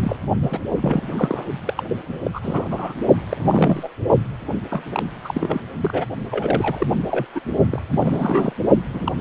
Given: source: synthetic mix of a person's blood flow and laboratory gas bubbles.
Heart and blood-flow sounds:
Doppler ultrasound of blood flow; precordium
0.00-0.17 s: bubbles
0.42-0.61 s: bubbles
0.76-1.45 s: bubbles
1.67-1.74 s: bubbles
1.78-2.30 s: bubbles
2.33-2.68 s: bubbles
2.71-2.94 s: bubbles
3.29-3.89 s: bubbles
4.12-4.20 s: bubbles
4.71-4.83 s: bubbles
4.92-5.06 s: bubbles
5.25-5.62 s: bubbles
5.77-6.05 s: bubbles
6.30-6.86 s: bubbles
7.06-7.26 s: bubbles
7.34-7.40 s: bubbles
7.71-7.82 s: bubbles
7.90-8.53 s: bubbles
8.94-9.12 s: bubbles
9.19-9.21 s: bubbles
From the record:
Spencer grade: 3 (all of the cardiac periods contain showers or single bubble signals, but not dominating or overriding the cardiac motion signals); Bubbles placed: only in the low amplitude regions of the cardiac cycle

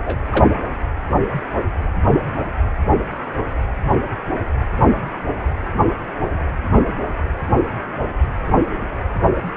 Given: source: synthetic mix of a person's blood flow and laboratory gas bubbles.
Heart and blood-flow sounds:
Doppler ultrasound of blood flow; precordium
0.00-0.17 s: bubbles
0.31-0.46 s: bubbles
From the record:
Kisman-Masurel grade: 213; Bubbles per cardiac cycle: several, 3 to 8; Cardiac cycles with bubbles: 1 to 10%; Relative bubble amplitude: loud (0.450 to 0.775); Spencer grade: 1 (occasional bubble signal discernible with the cardiac motion signal, with majority of cardiac periods free of bubbles); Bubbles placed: anywhere in the cardiac cycle

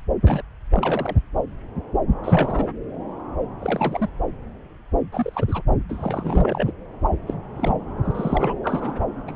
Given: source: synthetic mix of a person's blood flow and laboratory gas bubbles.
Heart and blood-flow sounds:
Doppler ultrasound of blood flow; subclavian vein
0.00-0.03 s: bubbles
0.27-0.42 s: bubbles
0.71-1.17 s: bubbles
2.24-2.68 s: bubbles
3.59-4.10 s: bubbles
5.12-5.62 s: bubbles
5.89-6.71 s: bubbles
7.27-7.34 s: bubbles
7.58-7.77 s: bubbles
8.04-8.54 s: bubbles
8.63-9.01 s: bubbles
9.28-9.36 s: bubbles
From the record:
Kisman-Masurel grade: 232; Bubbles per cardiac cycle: several, 3 to 8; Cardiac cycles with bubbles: 50 to 99%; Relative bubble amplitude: moderate (0.250 to 0.450); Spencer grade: 3 (all of the cardiac periods contain showers or single bubble signals, but not dominating or overriding the cardiac motion signals); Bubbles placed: anywhere in the cardiac cycle

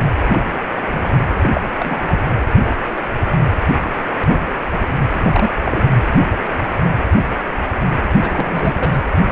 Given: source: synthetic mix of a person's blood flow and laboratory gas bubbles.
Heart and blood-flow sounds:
Doppler ultrasound of blood flow; precordium
0.28-0.42 s: bubbles
0.91-1.15 s: bubbles
1.29-1.36 s: bubbles
1.44-1.49 s: bubbles
1.53-1.61 s: bubbles
1.80-2.02 s: bubbles
2.07-2.18 s: bubbles
5.13-5.19 s: bubbles
5.22-5.60 s: bubbles
5.65-5.87 s: bubbles
8.14-9.02 s: bubbles
From the record:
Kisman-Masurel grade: 232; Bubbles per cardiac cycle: several, 3 to 8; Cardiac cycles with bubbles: 50 to 99%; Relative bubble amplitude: moderate (0.250 to 0.450); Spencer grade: 3 (all of the cardiac periods contain showers or single bubble signals, but not dominating or overriding the cardiac motion signals); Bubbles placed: anywhere in the cardiac cycle

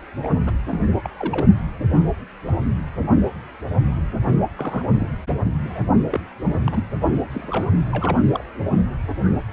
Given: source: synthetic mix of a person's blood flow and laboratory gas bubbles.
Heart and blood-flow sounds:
Doppler ultrasound of blood flow; precordium
0.22-0.28 s: bubbles
0.44-0.53 s: bubbles
0.71-0.80 s: bubbles
1.04-1.08 s: bubbles
1.19-1.46 s: bubbles
4.56-4.85 s: bubbles
4.96-5.12 s: bubbles
5.44-5.53 s: bubbles
5.64-5.81 s: bubbles
6.11-6.20 s: bubbles
6.64-6.84 s: bubbles
7.29-7.88 s: bubbles
7.92-8.17 s: bubbles
8.32-8.44 s: bubbles
From the record:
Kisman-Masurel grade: 221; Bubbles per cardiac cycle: several, 3 to 8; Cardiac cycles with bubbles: 10 to 50%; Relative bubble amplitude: barely perceptible (0.100 to 0.250); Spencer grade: 2 (many but less than half of the cardiac periods contain bubble signals, singularly or in groups); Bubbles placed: only in the low amplitude regions of the cardiac cycle

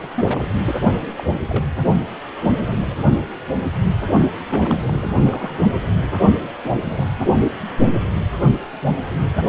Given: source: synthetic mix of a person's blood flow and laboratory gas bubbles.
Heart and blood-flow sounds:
Doppler ultrasound of blood flow; precordium
0.00-0.46 s: bubbles
0.65-0.75 s: bubbles
1.16-1.24 s: bubbles
1.49-1.67 s: bubbles
4.48-5.12 s: bubbles
5.25-5.52 s: bubbles
6.64-7.05 s: bubbles
From the record:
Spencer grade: 2 (many but less than half of the cardiac periods contain bubble signals, singularly or in groups); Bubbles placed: only in the low amplitude regions of the cardiac cycle

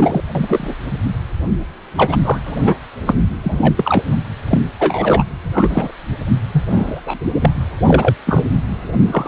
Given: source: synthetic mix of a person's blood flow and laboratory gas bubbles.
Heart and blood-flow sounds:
Doppler ultrasound of blood flow; precordium
0.00-0.21 s: bubbles
0.35-0.75 s: bubbles
0.91-0.97 s: bubbles
1.97-2.17 s: bubbles
2.24-2.38 s: bubbles
2.46-2.76 s: bubbles
3.06-3.16 s: bubbles
3.44-3.75 s: bubbles
3.77-4.04 s: bubbles
4.06-4.14 s: bubbles
4.50-4.62 s: bubbles
4.79-5.23 s: bubbles
5.53-5.92 s: bubbles
6.52-6.63 s: bubbles
6.70-7.00 s: bubbles
7.05-7.18 s: bubbles
7.40-7.53 s: bubbles
7.87-8.14 s: bubbles
8.26-8.58 s: bubbles
9.12-9.28 s: bubbles
From the record:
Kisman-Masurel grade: 243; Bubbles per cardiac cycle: several, 3 to 8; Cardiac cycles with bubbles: 100%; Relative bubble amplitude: loud (0.450 to 0.775); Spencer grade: 3 (all of the cardiac periods contain showers or single bubble signals, but not dominating or overriding the cardiac motion signals); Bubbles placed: anywhere in the cardiac cycle

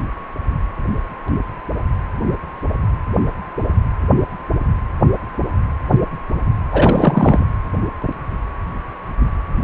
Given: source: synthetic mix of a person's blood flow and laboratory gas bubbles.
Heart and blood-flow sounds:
Doppler ultrasound of blood flow; precordium
6.71-7.45 s: bubbles
From the record:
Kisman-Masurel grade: 213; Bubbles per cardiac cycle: several, 3 to 8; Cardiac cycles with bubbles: 1 to 10%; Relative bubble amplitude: loud (0.450 to 0.775); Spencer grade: 1 (occasional bubble signal discernible with the cardiac motion signal, with majority of cardiac periods free of bubbles); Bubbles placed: anywhere in the cardiac cycle

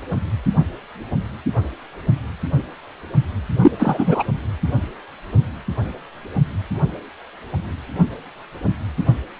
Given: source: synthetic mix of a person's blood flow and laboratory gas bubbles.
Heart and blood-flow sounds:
Doppler ultrasound of blood flow; precordium
3.62-3.71 s: bubbles
3.79-4.23 s: bubbles
From the record:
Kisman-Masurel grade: 213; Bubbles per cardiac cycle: several, 3 to 8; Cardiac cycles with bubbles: 1 to 10%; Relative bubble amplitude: loud (0.450 to 0.775); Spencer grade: 1 (occasional bubble signal discernible with the cardiac motion signal, with majority of cardiac periods free of bubbles); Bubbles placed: only in the low amplitude regions of the cardiac cycle

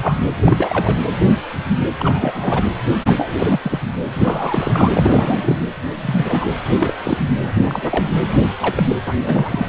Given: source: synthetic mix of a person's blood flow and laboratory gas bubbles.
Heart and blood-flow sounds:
Doppler ultrasound of blood flow; precordium
0.01-0.16 s: bubbles
0.36-0.56 s: bubbles
0.59-1.00 s: bubbles
1.99-2.70 s: bubbles
3.05-3.33 s: bubbles
3.38-3.60 s: bubbles
3.62-3.78 s: bubbles
4.12-5.55 s: bubbles
6.02-6.45 s: bubbles
6.79-6.93 s: bubbles
7.05-7.17 s: bubbles
7.68-8.08 s: bubbles
8.60-8.83 s: bubbles
8.88-8.96 s: bubbles
9.07-9.14 s: bubbles
9.23-9.67 s: bubbles
From the record:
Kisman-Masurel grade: 232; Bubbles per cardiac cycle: several, 3 to 8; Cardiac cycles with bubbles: 50 to 99%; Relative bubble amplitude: moderate (0.250 to 0.450); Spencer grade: 3 (all of the cardiac periods contain showers or single bubble signals, but not dominating or overriding the cardiac motion signals); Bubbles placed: anywhere in the cardiac cycle

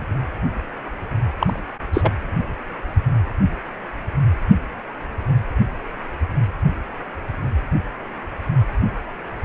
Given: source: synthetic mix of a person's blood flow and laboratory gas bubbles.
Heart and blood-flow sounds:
Doppler ultrasound of blood flow; precordium
1.38-1.59 s: bubbles
1.93-2.12 s: bubbles
From the record:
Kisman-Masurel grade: 213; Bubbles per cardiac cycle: several, 3 to 8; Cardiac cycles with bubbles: 1 to 10%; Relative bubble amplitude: loud (0.450 to 0.775); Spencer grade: 1 (occasional bubble signal discernible with the cardiac motion signal, with majority of cardiac periods free of bubbles); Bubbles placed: anywhere in the cardiac cycle

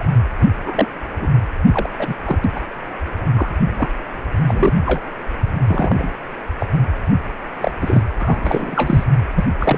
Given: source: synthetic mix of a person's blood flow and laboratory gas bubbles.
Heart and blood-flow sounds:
Doppler ultrasound of blood flow; precordium
0.00-0.09 s: bubbles
0.41-0.47 s: bubbles
0.66-0.90 s: bubbles
1.19-1.28 s: bubbles
1.72-1.90 s: bubbles
1.99-2.16 s: bubbles
2.25-2.38 s: bubbles
2.55-2.60 s: bubbles
3.34-3.51 s: bubbles
3.78-3.89 s: bubbles
4.48-4.73 s: bubbles
4.85-5.00 s: bubbles
5.67-6.08 s: bubbles
6.59-6.66 s: bubbles
7.60-7.71 s: bubbles
7.81-8.03 s: bubbles
8.21-9.04 s: bubbles
9.35-9.45 s: bubbles
9.60-9.78 s: bubbles
From the record:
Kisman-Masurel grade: 243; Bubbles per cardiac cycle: several, 3 to 8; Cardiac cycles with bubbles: 100%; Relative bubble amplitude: loud (0.450 to 0.775); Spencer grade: 3 (all of the cardiac periods contain showers or single bubble signals, but not dominating or overriding the cardiac motion signals); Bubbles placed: anywhere in the cardiac cycle

